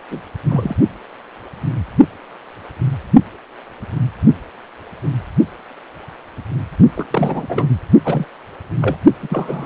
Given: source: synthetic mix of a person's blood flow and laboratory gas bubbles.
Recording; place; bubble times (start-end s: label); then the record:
Doppler ultrasound of blood flow; precordium
0.10-0.20 s: bubbles
0.47-0.76 s: bubbles
6.96-7.68 s: bubbles
8.04-8.24 s: bubbles
8.81-8.96 s: bubbles
9.22-9.66 s: bubbles
From the record:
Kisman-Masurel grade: 232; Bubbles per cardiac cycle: several, 3 to 8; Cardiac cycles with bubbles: 50 to 99%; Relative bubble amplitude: moderate (0.250 to 0.450); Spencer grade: 3 (all of the cardiac periods contain showers or single bubble signals, but not dominating or overriding the cardiac motion signals); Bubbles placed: only in the low amplitude regions of the cardiac cycle